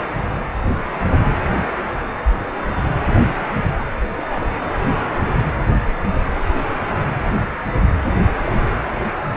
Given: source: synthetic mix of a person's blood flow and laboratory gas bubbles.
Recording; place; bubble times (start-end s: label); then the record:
Doppler ultrasound of blood flow; precordium
4.17-4.50 s: bubbles
From the record:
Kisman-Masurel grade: 111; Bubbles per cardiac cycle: 1 to 2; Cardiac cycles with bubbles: 1 to 10%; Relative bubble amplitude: barely perceptible (0.100 to 0.250); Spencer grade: 1 (occasional bubble signal discernible with the cardiac motion signal, with majority of cardiac periods free of bubbles); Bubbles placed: anywhere in the cardiac cycle